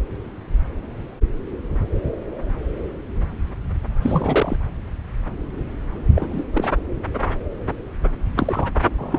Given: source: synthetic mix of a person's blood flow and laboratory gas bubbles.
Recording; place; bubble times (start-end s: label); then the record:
Doppler ultrasound of blood flow; subclavian vein
4.01-4.57 s: bubbles
6.15-6.43 s: bubbles
6.52-6.71 s: bubbles
8.36-8.71 s: bubbles
8.97-9.19 s: bubbles
From the record:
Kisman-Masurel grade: 223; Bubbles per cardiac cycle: several, 3 to 8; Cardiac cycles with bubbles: 10 to 50%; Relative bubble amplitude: loud (0.450 to 0.775); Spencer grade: 2 (many but less than half of the cardiac periods contain bubble signals, singularly or in groups); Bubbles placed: anywhere in the cardiac cycle